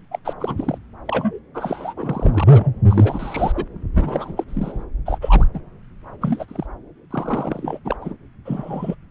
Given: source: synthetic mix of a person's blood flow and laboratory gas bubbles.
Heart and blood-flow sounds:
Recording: Doppler ultrasound of blood flow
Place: subclavian vein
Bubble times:
0.11-0.19 s: bubbles
0.24-0.33 s: bubbles
0.40-0.78 s: bubbles
1.06-1.39 s: bubbles
1.54-2.73 s: bubbles
2.90-3.52 s: bubbles
3.55-3.65 s: bubbles
3.95-4.44 s: bubbles
4.47-4.83 s: bubbles
5.05-5.18 s: bubbles
5.21-5.46 s: bubbles
5.53-5.59 s: bubbles
6.21-6.45 s: bubbles
6.48-6.67 s: bubbles
7.10-7.79 s: bubbles
7.85-7.96 s: bubbles
8.01-8.15 s: bubbles
8.45-8.95 s: bubbles
From the record:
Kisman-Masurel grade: 242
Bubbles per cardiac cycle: several, 3 to 8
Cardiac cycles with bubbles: 100%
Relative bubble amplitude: moderate (0.250 to 0.450)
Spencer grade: 3 (all of the cardiac periods contain showers or single bubble signals, but not dominating or overriding the cardiac motion signals)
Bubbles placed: anywhere in the cardiac cycle

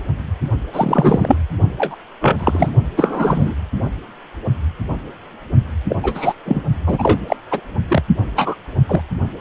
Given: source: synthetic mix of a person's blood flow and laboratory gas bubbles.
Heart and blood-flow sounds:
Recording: Doppler ultrasound of blood flow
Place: precordium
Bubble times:
0.73-1.37 s: bubbles
1.77-1.95 s: bubbles
2.21-2.72 s: bubbles
2.96-3.54 s: bubbles
5.89-5.96 s: bubbles
6.03-6.33 s: bubbles
6.46-6.62 s: bubbles
6.86-7.20 s: bubbles
7.27-7.36 s: bubbles
7.50-7.60 s: bubbles
7.90-8.02 s: bubbles
8.35-8.55 s: bubbles
8.88-9.01 s: bubbles
From the record:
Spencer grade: 3 (all of the cardiac periods contain showers or single bubble signals, but not dominating or overriding the cardiac motion signals)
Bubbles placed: only in the low amplitude regions of the cardiac cycle

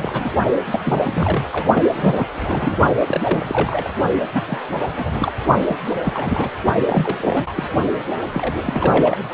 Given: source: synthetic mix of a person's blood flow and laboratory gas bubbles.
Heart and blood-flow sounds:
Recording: Doppler ultrasound of blood flow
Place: precordium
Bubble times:
0.00-0.30 s: bubbles
0.70-0.79 s: bubbles
0.85-1.44 s: bubbles
1.52-1.67 s: bubbles
1.75-1.83 s: bubbles
1.94-2.27 s: bubbles
2.36-2.77 s: bubbles
3.06-3.91 s: bubbles
4.33-4.44 s: bubbles
4.47-4.58 s: bubbles
4.88-5.32 s: bubbles
5.67-5.76 s: bubbles
6.04-6.50 s: bubbles
6.85-7.53 s: bubbles
7.56-7.68 s: bubbles
8.32-8.55 s: bubbles
8.66-9.23 s: bubbles
From the record:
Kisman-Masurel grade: 332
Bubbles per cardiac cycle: rolling drumbeat, 9 or more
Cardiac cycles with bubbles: 50 to 99%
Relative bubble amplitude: moderate (0.250 to 0.450)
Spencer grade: 3 (all of the cardiac periods contain showers or single bubble signals, but not dominating or overriding the cardiac motion signals)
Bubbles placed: only in the low amplitude regions of the cardiac cycle

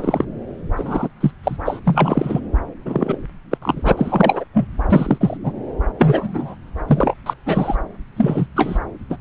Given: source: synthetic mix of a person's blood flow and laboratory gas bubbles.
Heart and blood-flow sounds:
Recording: Doppler ultrasound of blood flow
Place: subclavian vein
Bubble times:
0.00-0.24 s: bubbles
0.76-1.08 s: bubbles
1.21-1.31 s: bubbles
1.44-1.57 s: bubbles
1.65-1.80 s: bubbles
1.84-2.40 s: bubbles
2.85-3.17 s: bubbles
3.50-3.58 s: bubbles
3.62-3.93 s: bubbles
3.97-4.44 s: bubbles
4.54-4.67 s: bubbles
4.89-5.37 s: bubbles
5.43-5.53 s: bubbles
5.98-6.56 s: bubbles
6.87-7.14 s: bubbles
7.26-7.33 s: bubbles
7.46-7.75 s: bubbles
8.16-8.46 s: bubbles
8.55-8.79 s: bubbles
9.10-9.17 s: bubbles
From the record:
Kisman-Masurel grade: 243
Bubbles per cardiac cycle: several, 3 to 8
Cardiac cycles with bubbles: 100%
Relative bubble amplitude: loud (0.450 to 0.775)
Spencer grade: 3 (all of the cardiac periods contain showers or single bubble signals, but not dominating or overriding the cardiac motion signals)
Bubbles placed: anywhere in the cardiac cycle

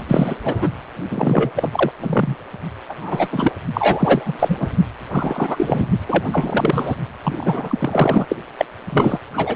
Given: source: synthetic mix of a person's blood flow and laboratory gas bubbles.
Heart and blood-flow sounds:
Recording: Doppler ultrasound of blood flow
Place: precordium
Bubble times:
0.07-0.35 s: bubbles
0.43-0.69 s: bubbles
1.10-1.51 s: bubbles
1.57-1.91 s: bubbles
2.00-2.35 s: bubbles
2.88-2.94 s: bubbles
3.01-3.28 s: bubbles
3.31-3.52 s: bubbles
3.73-4.34 s: bubbles
4.39-4.67 s: bubbles
5.10-5.87 s: bubbles
6.08-6.96 s: bubbles
7.23-8.26 s: bubbles
8.29-8.37 s: bubbles
8.58-8.65 s: bubbles
8.93-9.19 s: bubbles
9.33-9.56 s: bubbles
From the record:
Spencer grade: 3 (all of the cardiac periods contain showers or single bubble signals, but not dominating or overriding the cardiac motion signals)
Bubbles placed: only in the low amplitude regions of the cardiac cycle

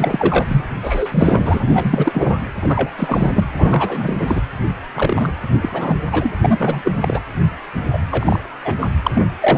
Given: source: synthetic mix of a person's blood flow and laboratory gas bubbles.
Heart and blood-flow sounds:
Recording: Doppler ultrasound of blood flow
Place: precordium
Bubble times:
0.00-0.64 s: bubbles
0.82-1.60 s: bubbles
1.66-2.40 s: bubbles
2.62-2.91 s: bubbles
2.97-3.31 s: bubbles
3.35-3.45 s: bubbles
3.58-4.42 s: bubbles
4.94-5.33 s: bubbles
5.61-5.96 s: bubbles
6.11-6.32 s: bubbles
6.42-6.57 s: bubbles
6.60-6.92 s: bubbles
7.00-7.22 s: bubbles
7.92-7.98 s: bubbles
8.11-8.40 s: bubbles
8.64-8.75 s: bubbles
8.80-8.90 s: bubbles
9.03-9.11 s: bubbles
9.13-9.22 s: bubbles
9.40-9.58 s: bubbles
From the record:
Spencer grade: 3 (all of the cardiac periods contain showers or single bubble signals, but not dominating or overriding the cardiac motion signals)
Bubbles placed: anywhere in the cardiac cycle

